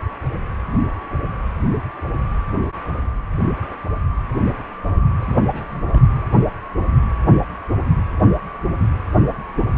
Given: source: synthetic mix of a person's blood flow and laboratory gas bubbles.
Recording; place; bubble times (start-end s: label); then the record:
Doppler ultrasound of blood flow; precordium
5.18-5.38 s: bubbles
5.44-5.81 s: bubbles
5.88-6.03 s: bubbles
From the record:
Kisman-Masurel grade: 211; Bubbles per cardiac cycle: several, 3 to 8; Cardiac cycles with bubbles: 1 to 10%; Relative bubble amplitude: barely perceptible (0.100 to 0.250); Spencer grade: 1 (occasional bubble signal discernible with the cardiac motion signal, with majority of cardiac periods free of bubbles); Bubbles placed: anywhere in the cardiac cycle